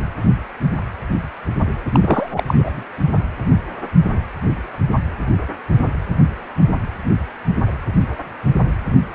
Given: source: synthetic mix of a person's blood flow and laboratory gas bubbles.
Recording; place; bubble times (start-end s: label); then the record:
Doppler ultrasound of blood flow; precordium
1.92-2.44 s: bubbles
2.46-2.83 s: bubbles
From the record:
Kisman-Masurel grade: 212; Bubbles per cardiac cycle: several, 3 to 8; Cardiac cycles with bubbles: 1 to 10%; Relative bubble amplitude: moderate (0.250 to 0.450); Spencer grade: 1 (occasional bubble signal discernible with the cardiac motion signal, with majority of cardiac periods free of bubbles); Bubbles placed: anywhere in the cardiac cycle